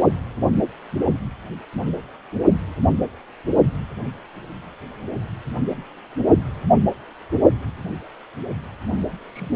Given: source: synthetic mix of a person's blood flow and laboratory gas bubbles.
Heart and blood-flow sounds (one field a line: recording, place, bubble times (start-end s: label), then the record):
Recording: Doppler ultrasound of blood flow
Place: precordium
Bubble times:
9.32-9.56 s: bubbles
From the record:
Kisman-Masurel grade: 123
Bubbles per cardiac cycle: 1 to 2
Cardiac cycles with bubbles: 10 to 50%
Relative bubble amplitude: loud (0.450 to 0.775)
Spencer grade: 2 (many but less than half of the cardiac periods contain bubble signals, singularly or in groups)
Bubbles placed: only in the low amplitude regions of the cardiac cycle